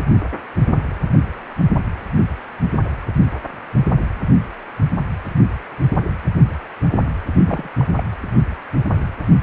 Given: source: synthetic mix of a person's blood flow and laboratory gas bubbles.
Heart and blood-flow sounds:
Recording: Doppler ultrasound of blood flow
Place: precordium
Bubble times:
7.45-7.68 s: bubbles
7.77-7.87 s: bubbles
7.96-8.03 s: bubbles
From the record:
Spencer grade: 1 (occasional bubble signal discernible with the cardiac motion signal, with majority of cardiac periods free of bubbles)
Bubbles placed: anywhere in the cardiac cycle

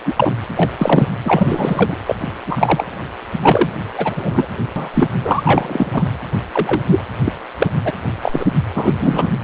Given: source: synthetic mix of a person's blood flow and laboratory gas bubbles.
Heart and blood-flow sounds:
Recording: Doppler ultrasound of blood flow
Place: precordium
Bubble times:
0.05-0.33 s: bubbles
0.56-0.72 s: bubbles
0.78-1.08 s: bubbles
1.25-1.97 s: bubbles
2.06-2.15 s: bubbles
2.20-2.28 s: bubbles
2.47-2.86 s: bubbles
3.42-3.70 s: bubbles
3.95-4.16 s: bubbles
4.19-4.46 s: bubbles
4.75-4.90 s: bubbles
4.94-5.09 s: bubbles
5.24-6.03 s: bubbles
6.52-6.82 s: bubbles
6.91-7.03 s: bubbles
7.25-7.32 s: bubbles
7.58-7.67 s: bubbles
7.84-7.91 s: bubbles
8.22-8.46 s: bubbles
8.75-9.32 s: bubbles
From the record:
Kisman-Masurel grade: 243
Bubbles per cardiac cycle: several, 3 to 8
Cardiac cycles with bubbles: 100%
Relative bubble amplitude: loud (0.450 to 0.775)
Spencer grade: 3 (all of the cardiac periods contain showers or single bubble signals, but not dominating or overriding the cardiac motion signals)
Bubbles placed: anywhere in the cardiac cycle

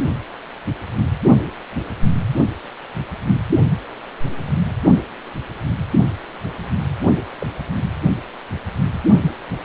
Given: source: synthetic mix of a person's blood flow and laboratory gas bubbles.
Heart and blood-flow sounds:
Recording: Doppler ultrasound of blood flow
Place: precordium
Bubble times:
7.38-7.46 s: bubbles
From the record:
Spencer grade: 1 (occasional bubble signal discernible with the cardiac motion signal, with majority of cardiac periods free of bubbles)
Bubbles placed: anywhere in the cardiac cycle

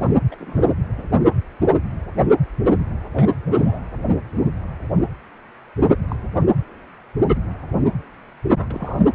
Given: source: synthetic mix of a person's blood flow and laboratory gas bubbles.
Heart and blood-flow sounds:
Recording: Doppler ultrasound of blood flow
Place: precordium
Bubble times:
0.04-0.08 s: bubbles
0.31-0.35 s: bubbles
0.39-0.70 s: bubbles
0.98-1.04 s: bubbles
3.14-3.29 s: bubbles
3.46-3.51 s: bubbles
3.56-3.80 s: bubbles
6.08-6.16 s: bubbles
6.32-6.40 s: bubbles
8.52-8.66 s: bubbles
8.70-8.99 s: bubbles
From the record:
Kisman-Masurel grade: 121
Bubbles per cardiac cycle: 1 to 2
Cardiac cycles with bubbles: 10 to 50%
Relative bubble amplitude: barely perceptible (0.100 to 0.250)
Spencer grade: 2 (many but less than half of the cardiac periods contain bubble signals, singularly or in groups)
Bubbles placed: anywhere in the cardiac cycle

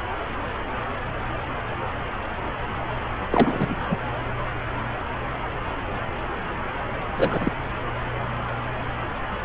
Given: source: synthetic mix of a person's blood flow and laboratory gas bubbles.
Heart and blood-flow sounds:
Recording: Doppler ultrasound of blood flow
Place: subclavian vein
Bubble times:
3.30-3.77 s: bubbles
3.89-3.98 s: bubbles
7.17-7.52 s: bubbles
From the record:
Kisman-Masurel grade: 223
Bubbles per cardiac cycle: several, 3 to 8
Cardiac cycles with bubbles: 10 to 50%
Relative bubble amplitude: loud (0.450 to 0.775)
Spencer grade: 2 (many but less than half of the cardiac periods contain bubble signals, singularly or in groups)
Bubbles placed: anywhere in the cardiac cycle

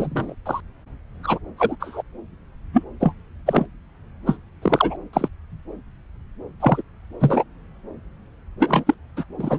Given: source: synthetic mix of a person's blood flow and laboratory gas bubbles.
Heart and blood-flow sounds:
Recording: Doppler ultrasound of blood flow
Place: subclavian vein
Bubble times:
0.00-0.34 s: bubbles
0.45-0.60 s: bubbles
1.23-1.39 s: bubbles
1.58-1.76 s: bubbles
1.80-2.02 s: bubbles
2.74-2.83 s: bubbles
3.00-3.12 s: bubbles
3.46-3.66 s: bubbles
4.26-4.37 s: bubbles
4.61-4.96 s: bubbles
5.13-5.29 s: bubbles
6.60-6.82 s: bubbles
7.19-7.43 s: bubbles
8.60-8.84 s: bubbles
8.87-8.95 s: bubbles
9.17-9.25 s: bubbles
9.38-9.59 s: bubbles
From the record:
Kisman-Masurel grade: 243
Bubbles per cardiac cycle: several, 3 to 8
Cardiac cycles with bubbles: 100%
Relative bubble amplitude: loud (0.450 to 0.775)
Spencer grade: 3 (all of the cardiac periods contain showers or single bubble signals, but not dominating or overriding the cardiac motion signals)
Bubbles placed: anywhere in the cardiac cycle

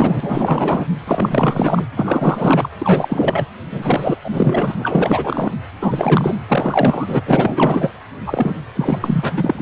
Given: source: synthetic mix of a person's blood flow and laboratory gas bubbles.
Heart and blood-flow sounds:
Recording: Doppler ultrasound of blood flow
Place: precordium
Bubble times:
0.00-0.85 s: bubbles
1.06-1.85 s: bubbles
1.96-2.69 s: bubbles
2.79-3.46 s: bubbles
3.71-4.17 s: bubbles
4.24-5.55 s: bubbles
5.82-6.35 s: bubbles
6.47-7.22 s: bubbles
7.25-7.90 s: bubbles
8.26-8.54 s: bubbles
8.75-9.32 s: bubbles
9.36-9.62 s: bubbles
From the record:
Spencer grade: 4 (maximum detectable bubble signal sounding continuously throughout systole and diastole of every cardiac period, and overriding the amplitude of the normal cardiac signals)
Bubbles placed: anywhere in the cardiac cycle

